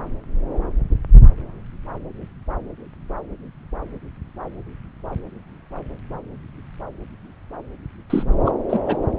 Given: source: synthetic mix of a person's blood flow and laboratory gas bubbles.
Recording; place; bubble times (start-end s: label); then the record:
Doppler ultrasound of blood flow; subclavian vein
8.09-8.23 s: bubbles
8.45-8.51 s: bubbles
8.69-8.79 s: bubbles
8.86-8.96 s: bubbles
From the record:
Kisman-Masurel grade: 212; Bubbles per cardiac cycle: several, 3 to 8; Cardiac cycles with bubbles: 1 to 10%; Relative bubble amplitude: moderate (0.250 to 0.450); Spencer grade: 1 (occasional bubble signal discernible with the cardiac motion signal, with majority of cardiac periods free of bubbles); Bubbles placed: anywhere in the cardiac cycle